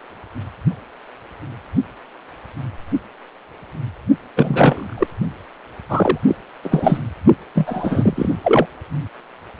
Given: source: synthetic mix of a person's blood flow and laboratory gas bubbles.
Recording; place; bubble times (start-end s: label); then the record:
Doppler ultrasound of blood flow; precordium
4.36-4.94 s: bubbles
4.97-5.07 s: bubbles
5.89-6.18 s: bubbles
6.28-6.36 s: bubbles
6.62-6.98 s: bubbles
7.55-8.33 s: bubbles
8.44-8.66 s: bubbles
From the record:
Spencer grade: 2 (many but less than half of the cardiac periods contain bubble signals, singularly or in groups); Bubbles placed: only in the low amplitude regions of the cardiac cycle